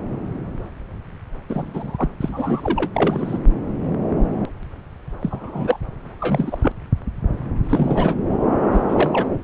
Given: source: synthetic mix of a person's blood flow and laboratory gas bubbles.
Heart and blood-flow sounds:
Doppler ultrasound of blood flow; subclavian vein
1.48-2.10 s: bubbles
2.21-2.91 s: bubbles
2.94-3.39 s: bubbles
5.21-5.79 s: bubbles
6.20-6.57 s: bubbles
6.61-6.72 s: bubbles
7.69-8.15 s: bubbles
8.71-9.37 s: bubbles
From the record:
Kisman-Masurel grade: 233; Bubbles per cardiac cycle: several, 3 to 8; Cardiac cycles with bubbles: 50 to 99%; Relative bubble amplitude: loud (0.450 to 0.775); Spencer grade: 3 (all of the cardiac periods contain showers or single bubble signals, but not dominating or overriding the cardiac motion signals); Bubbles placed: anywhere in the cardiac cycle

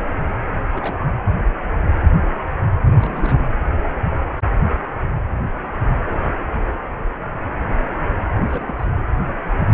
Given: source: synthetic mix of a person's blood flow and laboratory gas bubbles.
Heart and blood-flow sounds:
Doppler ultrasound of blood flow; precordium
0.73-1.05 s: bubbles
2.81-3.39 s: bubbles
8.30-8.75 s: bubbles
8.78-8.88 s: bubbles
From the record:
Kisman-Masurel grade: 221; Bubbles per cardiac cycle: several, 3 to 8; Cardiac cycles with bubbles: 10 to 50%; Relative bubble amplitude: barely perceptible (0.100 to 0.250); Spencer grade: 2 (many but less than half of the cardiac periods contain bubble signals, singularly or in groups); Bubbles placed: anywhere in the cardiac cycle

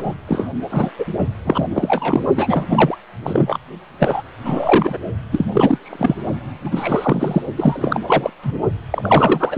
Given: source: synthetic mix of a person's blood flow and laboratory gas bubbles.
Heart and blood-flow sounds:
Doppler ultrasound of blood flow; precordium
0.00-0.15 s: bubbles
0.27-0.48 s: bubbles
0.70-0.91 s: bubbles
0.98-1.05 s: bubbles
1.45-2.26 s: bubbles
2.35-2.65 s: bubbles
2.70-2.97 s: bubbles
3.23-3.58 s: bubbles
3.98-4.21 s: bubbles
4.44-4.99 s: bubbles
5.31-5.45 s: bubbles
5.54-5.78 s: bubbles
5.82-6.17 s: bubbles
6.64-7.42 s: bubbles
7.56-8.00 s: bubbles
8.07-8.30 s: bubbles
8.42-8.52 s: bubbles
8.90-9.58 s: bubbles
From the record:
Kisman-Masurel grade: 343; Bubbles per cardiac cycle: rolling drumbeat, 9 or more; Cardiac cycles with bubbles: 100%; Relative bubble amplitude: loud (0.450 to 0.775); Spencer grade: 3 (all of the cardiac periods contain showers or single bubble signals, but not dominating or overriding the cardiac motion signals); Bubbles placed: only in the low amplitude regions of the cardiac cycle

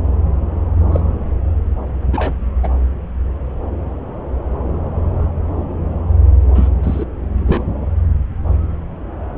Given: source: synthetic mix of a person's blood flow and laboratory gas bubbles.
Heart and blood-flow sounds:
Doppler ultrasound of blood flow; subclavian vein
0.91-1.00 s: bubbles
2.12-2.33 s: bubbles
2.63-2.70 s: bubbles
6.54-6.68 s: bubbles
6.83-7.05 s: bubbles
7.47-7.63 s: bubbles
From the record:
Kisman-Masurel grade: 222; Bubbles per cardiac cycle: several, 3 to 8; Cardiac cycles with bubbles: 10 to 50%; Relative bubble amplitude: moderate (0.250 to 0.450); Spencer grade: 2 (many but less than half of the cardiac periods contain bubble signals, singularly or in groups); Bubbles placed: anywhere in the cardiac cycle

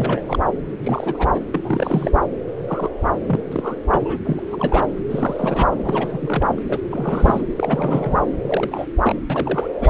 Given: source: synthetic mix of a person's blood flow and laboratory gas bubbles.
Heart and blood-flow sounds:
Doppler ultrasound of blood flow; subclavian vein
0.00-0.40 s: bubbles
0.82-1.29 s: bubbles
1.33-1.40 s: bubbles
1.53-2.10 s: bubbles
2.68-2.90 s: bubbles
3.27-3.40 s: bubbles
3.52-3.76 s: bubbles
3.88-4.19 s: bubbles
4.25-4.88 s: bubbles
5.09-5.75 s: bubbles
5.83-6.59 s: bubbles
6.69-6.80 s: bubbles
6.90-7.42 s: bubbles
7.56-8.27 s: bubbles
8.41-8.86 s: bubbles
9.03-9.13 s: bubbles
9.29-9.67 s: bubbles
9.80-9.89 s: bubbles
From the record:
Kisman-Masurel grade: 242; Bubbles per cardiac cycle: several, 3 to 8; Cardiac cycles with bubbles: 100%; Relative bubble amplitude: moderate (0.250 to 0.450); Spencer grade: 3 (all of the cardiac periods contain showers or single bubble signals, but not dominating or overriding the cardiac motion signals); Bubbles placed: anywhere in the cardiac cycle

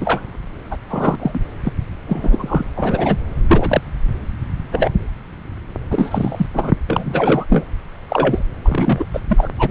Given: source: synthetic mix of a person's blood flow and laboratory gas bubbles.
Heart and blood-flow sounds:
Doppler ultrasound of blood flow; subclavian vein
0.01-0.21 s: bubbles
0.70-0.77 s: bubbles
0.89-1.17 s: bubbles
1.19-1.39 s: bubbles
1.64-1.72 s: bubbles
2.06-2.65 s: bubbles
2.76-3.18 s: bubbles
3.48-3.81 s: bubbles
4.71-4.91 s: bubbles
5.90-6.46 s: bubbles
6.53-6.73 s: bubbles
6.87-7.44 s: bubbles
7.49-7.65 s: bubbles
8.08-8.43 s: bubbles
8.65-9.05 s: bubbles
9.13-9.20 s: bubbles
9.29-9.49 s: bubbles
9.58-9.71 s: bubbles
From the record:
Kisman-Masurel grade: 243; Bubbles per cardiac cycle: several, 3 to 8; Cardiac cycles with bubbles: 100%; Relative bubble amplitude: loud (0.450 to 0.775); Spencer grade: 3 (all of the cardiac periods contain showers or single bubble signals, but not dominating or overriding the cardiac motion signals); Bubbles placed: anywhere in the cardiac cycle

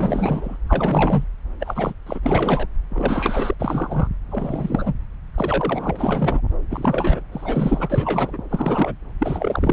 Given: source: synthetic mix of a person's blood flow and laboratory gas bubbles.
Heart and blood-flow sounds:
Doppler ultrasound of blood flow; subclavian vein
0.00-0.57 s: bubbles
0.68-1.24 s: bubbles
1.59-1.94 s: bubbles
2.06-2.20 s: bubbles
2.23-2.67 s: bubbles
2.90-3.54 s: bubbles
3.59-4.08 s: bubbles
4.31-4.93 s: bubbles
5.36-6.41 s: bubbles
6.70-7.21 s: bubbles
7.32-8.38 s: bubbles
8.49-8.93 s: bubbles
9.19-9.73 s: bubbles
From the record:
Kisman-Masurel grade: 342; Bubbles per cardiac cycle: rolling drumbeat, 9 or more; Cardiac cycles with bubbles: 100%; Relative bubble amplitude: moderate (0.250 to 0.450); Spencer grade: 3 (all of the cardiac periods contain showers or single bubble signals, but not dominating or overriding the cardiac motion signals); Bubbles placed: anywhere in the cardiac cycle

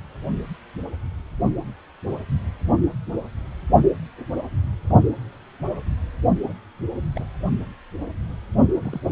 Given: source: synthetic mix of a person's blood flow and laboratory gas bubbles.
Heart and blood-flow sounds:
Doppler ultrasound of blood flow; precordium
6.45-6.53 s: bubbles
7.16-7.25 s: bubbles
8.77-9.01 s: bubbles
From the record:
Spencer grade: 2 (many but less than half of the cardiac periods contain bubble signals, singularly or in groups); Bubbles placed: only in the low amplitude regions of the cardiac cycle

